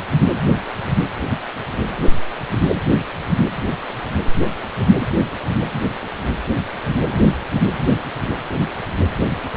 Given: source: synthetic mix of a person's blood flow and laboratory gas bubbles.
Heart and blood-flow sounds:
Doppler ultrasound of blood flow; precordium
7.11-7.21 s: bubbles
7.29-7.34 s: bubbles
From the record:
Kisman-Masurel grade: 111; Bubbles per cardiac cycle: 1 to 2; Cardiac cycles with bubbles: 1 to 10%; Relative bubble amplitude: barely perceptible (0.100 to 0.250); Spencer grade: 1 (occasional bubble signal discernible with the cardiac motion signal, with majority of cardiac periods free of bubbles); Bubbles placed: anywhere in the cardiac cycle

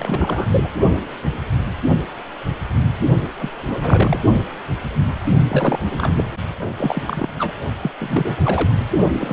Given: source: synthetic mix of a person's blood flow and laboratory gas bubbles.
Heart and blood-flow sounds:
Doppler ultrasound of blood flow; precordium
0.00-0.68 s: bubbles
3.39-3.51 s: bubbles
3.67-4.22 s: bubbles
5.48-5.79 s: bubbles
5.89-6.14 s: bubbles
6.18-6.24 s: bubbles
6.55-6.73 s: bubbles
6.77-7.29 s: bubbles
7.39-7.54 s: bubbles
7.80-7.91 s: bubbles
8.00-8.72 s: bubbles
9.12-9.33 s: bubbles
From the record:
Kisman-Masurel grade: 332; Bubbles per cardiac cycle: rolling drumbeat, 9 or more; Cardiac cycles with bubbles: 50 to 99%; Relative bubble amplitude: moderate (0.250 to 0.450); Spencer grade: 3 (all of the cardiac periods contain showers or single bubble signals, but not dominating or overriding the cardiac motion signals); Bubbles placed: only in the low amplitude regions of the cardiac cycle

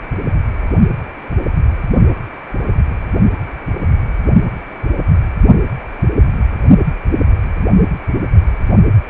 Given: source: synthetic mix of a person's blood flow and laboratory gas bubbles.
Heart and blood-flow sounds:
Doppler ultrasound of blood flow; precordium
no bubbles
From the record:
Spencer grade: 0 (complete lack of bubble signals)

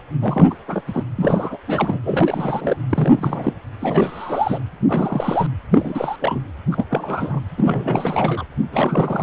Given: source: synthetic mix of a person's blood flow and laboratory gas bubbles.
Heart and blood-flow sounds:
Doppler ultrasound of blood flow; precordium
0.21-0.47 s: bubbles
0.50-0.56 s: bubbles
0.68-0.82 s: bubbles
0.87-1.04 s: bubbles
1.15-1.58 s: bubbles
1.67-2.00 s: bubbles
2.03-2.77 s: bubbles
2.90-3.54 s: bubbles
3.80-4.61 s: bubbles
4.89-5.47 s: bubbles
5.71-6.43 s: bubbles
6.71-6.85 s: bubbles
6.90-7.40 s: bubbles
7.57-8.44 s: bubbles
8.72-9.23 s: bubbles
From the record:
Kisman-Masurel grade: 332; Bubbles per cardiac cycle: rolling drumbeat, 9 or more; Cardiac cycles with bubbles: 50 to 99%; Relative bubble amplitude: moderate (0.250 to 0.450); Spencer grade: 3 (all of the cardiac periods contain showers or single bubble signals, but not dominating or overriding the cardiac motion signals); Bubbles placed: anywhere in the cardiac cycle

